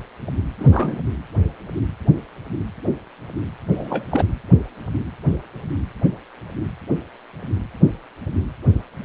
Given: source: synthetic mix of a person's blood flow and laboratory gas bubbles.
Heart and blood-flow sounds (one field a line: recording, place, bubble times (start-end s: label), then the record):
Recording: Doppler ultrasound of blood flow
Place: precordium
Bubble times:
0.58-1.00 s: bubbles
3.71-4.06 s: bubbles
4.11-4.25 s: bubbles
From the record:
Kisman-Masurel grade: 212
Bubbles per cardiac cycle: several, 3 to 8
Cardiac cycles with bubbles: 1 to 10%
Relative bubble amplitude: moderate (0.250 to 0.450)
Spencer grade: 1 (occasional bubble signal discernible with the cardiac motion signal, with majority of cardiac periods free of bubbles)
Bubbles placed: anywhere in the cardiac cycle